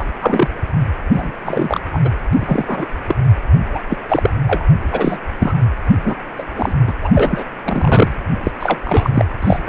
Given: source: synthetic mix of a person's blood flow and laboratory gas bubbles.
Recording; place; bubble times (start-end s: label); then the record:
Doppler ultrasound of blood flow; precordium
0.00-0.06 s: bubbles
0.21-0.49 s: bubbles
1.12-1.31 s: bubbles
1.44-1.80 s: bubbles
1.93-1.99 s: bubbles
2.05-2.09 s: bubbles
2.32-2.86 s: bubbles
3.06-3.15 s: bubbles
3.73-3.81 s: bubbles
3.89-3.97 s: bubbles
4.08-4.30 s: bubbles
4.46-4.65 s: bubbles
4.92-5.18 s: bubbles
5.38-5.54 s: bubbles
5.92-6.15 s: bubbles
6.38-6.43 s: bubbles
6.55-6.72 s: bubbles
6.87-6.93 s: bubbles
7.02-7.11 s: bubbles
7.14-7.43 s: bubbles
7.64-8.12 s: bubbles
8.44-8.51 s: bubbles
8.59-8.79 s: bubbles
8.85-9.25 s: bubbles
9.40-9.58 s: bubbles
9.64-9.69 s: bubbles
From the record:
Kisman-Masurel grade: 233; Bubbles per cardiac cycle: several, 3 to 8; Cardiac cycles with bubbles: 50 to 99%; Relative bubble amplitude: loud (0.450 to 0.775); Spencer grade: 3 (all of the cardiac periods contain showers or single bubble signals, but not dominating or overriding the cardiac motion signals); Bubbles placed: anywhere in the cardiac cycle